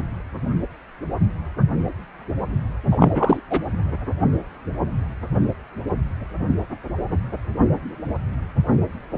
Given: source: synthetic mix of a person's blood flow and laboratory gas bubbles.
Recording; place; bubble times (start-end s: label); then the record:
Doppler ultrasound of blood flow; precordium
2.92-3.10 s: bubbles
3.15-3.40 s: bubbles
3.50-3.61 s: bubbles
From the record:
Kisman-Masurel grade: 222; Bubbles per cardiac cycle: several, 3 to 8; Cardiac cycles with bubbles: 10 to 50%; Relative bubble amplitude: moderate (0.250 to 0.450); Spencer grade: 2 (many but less than half of the cardiac periods contain bubble signals, singularly or in groups); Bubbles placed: anywhere in the cardiac cycle